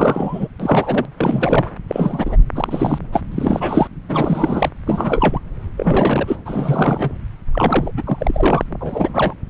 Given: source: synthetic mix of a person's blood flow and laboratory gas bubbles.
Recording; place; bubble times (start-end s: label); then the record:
Doppler ultrasound of blood flow; subclavian vein
0.00-0.48 s: bubbles
0.59-1.11 s: bubbles
1.17-1.71 s: bubbles
1.88-2.36 s: bubbles
2.55-2.98 s: bubbles
3.12-3.21 s: bubbles
3.31-3.88 s: bubbles
4.08-4.70 s: bubbles
4.86-5.39 s: bubbles
5.77-6.36 s: bubbles
6.46-7.12 s: bubbles
7.53-7.92 s: bubbles
7.97-8.03 s: bubbles
8.06-8.63 s: bubbles
8.81-9.09 s: bubbles
9.14-9.34 s: bubbles
From the record:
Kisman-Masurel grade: 342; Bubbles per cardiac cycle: rolling drumbeat, 9 or more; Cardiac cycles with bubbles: 100%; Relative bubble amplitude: moderate (0.250 to 0.450); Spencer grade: 3 (all of the cardiac periods contain showers or single bubble signals, but not dominating or overriding the cardiac motion signals); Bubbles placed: anywhere in the cardiac cycle